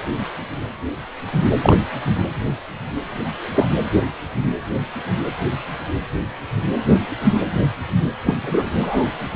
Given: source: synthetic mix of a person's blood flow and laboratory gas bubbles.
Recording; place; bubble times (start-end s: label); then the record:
Doppler ultrasound of blood flow; precordium
1.62-1.77 s: bubbles
3.55-3.68 s: bubbles
3.91-4.01 s: bubbles
8.25-8.37 s: bubbles
8.42-8.66 s: bubbles
8.71-9.11 s: bubbles
From the record:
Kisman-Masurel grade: 123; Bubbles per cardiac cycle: 1 to 2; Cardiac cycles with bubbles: 10 to 50%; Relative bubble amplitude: loud (0.450 to 0.775); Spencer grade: 2 (many but less than half of the cardiac periods contain bubble signals, singularly or in groups); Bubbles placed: anywhere in the cardiac cycle